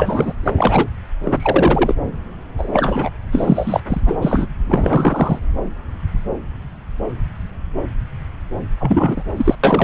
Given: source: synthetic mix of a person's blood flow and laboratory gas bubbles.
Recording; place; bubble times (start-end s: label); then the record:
Doppler ultrasound of blood flow; subclavian vein
0.00-0.33 s: bubbles
0.43-0.52 s: bubbles
0.56-0.89 s: bubbles
1.23-1.95 s: bubbles
2.58-3.10 s: bubbles
3.31-3.80 s: bubbles
3.88-4.00 s: bubbles
4.05-4.46 s: bubbles
4.67-5.39 s: bubbles
8.79-9.24 s: bubbles
9.36-9.55 s: bubbles
9.63-9.84 s: bubbles
From the record:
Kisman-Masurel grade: 333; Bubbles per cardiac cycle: rolling drumbeat, 9 or more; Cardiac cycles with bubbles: 50 to 99%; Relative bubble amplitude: loud (0.450 to 0.775); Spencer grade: 3 (all of the cardiac periods contain showers or single bubble signals, but not dominating or overriding the cardiac motion signals); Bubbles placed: anywhere in the cardiac cycle